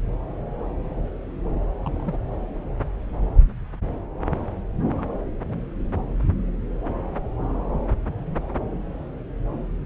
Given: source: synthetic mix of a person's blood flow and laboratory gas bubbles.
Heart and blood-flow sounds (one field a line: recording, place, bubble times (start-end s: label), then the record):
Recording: Doppler ultrasound of blood flow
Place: subclavian vein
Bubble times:
1.82-2.17 s: bubbles
4.97-5.03 s: bubbles
From the record:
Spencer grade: 2 (many but less than half of the cardiac periods contain bubble signals, singularly or in groups)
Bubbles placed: anywhere in the cardiac cycle